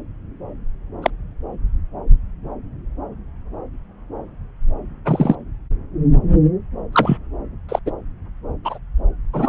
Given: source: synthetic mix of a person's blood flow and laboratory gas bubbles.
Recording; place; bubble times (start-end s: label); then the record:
Doppler ultrasound of blood flow; subclavian vein
1.02-1.10 s: bubbles
5.05-5.36 s: bubbles
6.92-7.18 s: bubbles
7.69-7.79 s: bubbles
7.86-7.92 s: bubbles
8.64-8.78 s: bubbles
9.33-9.49 s: bubbles
From the record:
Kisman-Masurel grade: 123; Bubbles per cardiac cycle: 1 to 2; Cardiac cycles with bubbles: 10 to 50%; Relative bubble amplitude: loud (0.450 to 0.775); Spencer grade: 2 (many but less than half of the cardiac periods contain bubble signals, singularly or in groups); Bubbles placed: anywhere in the cardiac cycle